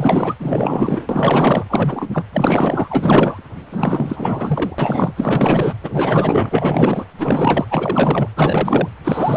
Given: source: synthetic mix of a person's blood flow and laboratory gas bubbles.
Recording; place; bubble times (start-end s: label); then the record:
Doppler ultrasound of blood flow; precordium
0.00-0.34 s: bubbles
0.40-1.64 s: bubbles
1.70-2.10 s: bubbles
2.13-2.24 s: bubbles
2.32-3.43 s: bubbles
3.71-5.13 s: bubbles
5.16-5.75 s: bubbles
5.81-7.04 s: bubbles
7.18-7.65 s: bubbles
7.71-8.29 s: bubbles
8.37-8.89 s: bubbles
9.04-9.37 s: bubbles
From the record:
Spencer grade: 4 (maximum detectable bubble signal sounding continuously throughout systole and diastole of every cardiac period, and overriding the amplitude of the normal cardiac signals); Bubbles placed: anywhere in the cardiac cycle